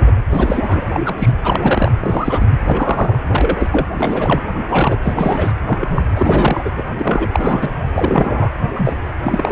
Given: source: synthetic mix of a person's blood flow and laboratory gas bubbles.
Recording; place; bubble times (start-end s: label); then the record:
Doppler ultrasound of blood flow; precordium
0.00-0.11 s: bubbles
0.30-0.84 s: bubbles
0.93-1.00 s: bubbles
1.04-1.15 s: bubbles
1.19-1.33 s: bubbles
1.44-1.92 s: bubbles
1.99-2.47 s: bubbles
2.65-3.19 s: bubbles
3.32-3.87 s: bubbles
3.98-4.43 s: bubbles
4.68-4.99 s: bubbles
5.02-5.53 s: bubbles
5.67-6.07 s: bubbles
6.16-6.71 s: bubbles
6.77-6.83 s: bubbles
6.98-7.29 s: bubbles
7.32-7.90 s: bubbles
7.94-8.50 s: bubbles
8.76-8.93 s: bubbles
9.23-9.52 s: bubbles
From the record:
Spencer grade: 3 (all of the cardiac periods contain showers or single bubble signals, but not dominating or overriding the cardiac motion signals); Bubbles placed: anywhere in the cardiac cycle